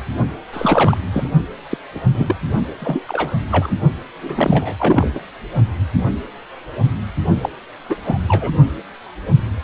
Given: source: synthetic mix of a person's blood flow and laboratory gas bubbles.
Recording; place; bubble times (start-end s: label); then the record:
Doppler ultrasound of blood flow; precordium
0.52-0.98 s: bubbles
1.12-1.28 s: bubbles
1.70-1.78 s: bubbles
1.94-2.00 s: bubbles
2.14-2.36 s: bubbles
2.80-3.05 s: bubbles
3.08-3.33 s: bubbles
3.50-3.73 s: bubbles
4.21-4.75 s: bubbles
4.79-5.10 s: bubbles
5.14-5.19 s: bubbles
7.42-7.49 s: bubbles
7.89-7.96 s: bubbles
8.05-8.17 s: bubbles
8.28-8.52 s: bubbles
From the record:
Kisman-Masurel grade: 233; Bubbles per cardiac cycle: several, 3 to 8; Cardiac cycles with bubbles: 50 to 99%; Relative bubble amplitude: loud (0.450 to 0.775); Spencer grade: 3 (all of the cardiac periods contain showers or single bubble signals, but not dominating or overriding the cardiac motion signals); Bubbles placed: only in the low amplitude regions of the cardiac cycle